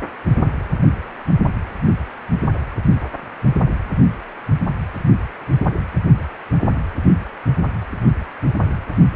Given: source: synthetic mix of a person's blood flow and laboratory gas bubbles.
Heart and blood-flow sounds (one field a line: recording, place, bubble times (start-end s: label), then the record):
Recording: Doppler ultrasound of blood flow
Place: precordium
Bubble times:
no bubbles
From the record:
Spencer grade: 0 (complete lack of bubble signals)